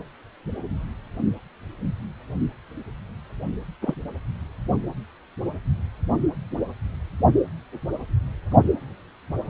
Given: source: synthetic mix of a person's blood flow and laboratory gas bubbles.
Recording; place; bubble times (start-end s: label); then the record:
Doppler ultrasound of blood flow; precordium
3.81-3.95 s: bubbles
From the record:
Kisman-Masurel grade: 122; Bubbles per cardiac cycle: 1 to 2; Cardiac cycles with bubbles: 10 to 50%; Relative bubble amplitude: moderate (0.250 to 0.450); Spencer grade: 2 (many but less than half of the cardiac periods contain bubble signals, singularly or in groups); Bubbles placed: only in the low amplitude regions of the cardiac cycle